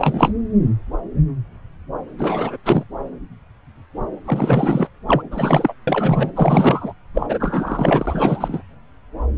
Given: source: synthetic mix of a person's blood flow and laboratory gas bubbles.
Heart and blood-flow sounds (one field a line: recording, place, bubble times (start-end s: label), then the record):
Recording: Doppler ultrasound of blood flow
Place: subclavian vein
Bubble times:
0.00-0.33 s: bubbles
2.18-2.57 s: bubbles
2.64-2.83 s: bubbles
4.25-4.88 s: bubbles
5.07-5.22 s: bubbles
5.30-5.73 s: bubbles
5.87-6.30 s: bubbles
6.35-6.93 s: bubbles
7.14-8.62 s: bubbles
From the record:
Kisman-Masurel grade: 333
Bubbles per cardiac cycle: rolling drumbeat, 9 or more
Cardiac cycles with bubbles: 50 to 99%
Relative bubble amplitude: loud (0.450 to 0.775)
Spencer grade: 3 (all of the cardiac periods contain showers or single bubble signals, but not dominating or overriding the cardiac motion signals)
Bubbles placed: anywhere in the cardiac cycle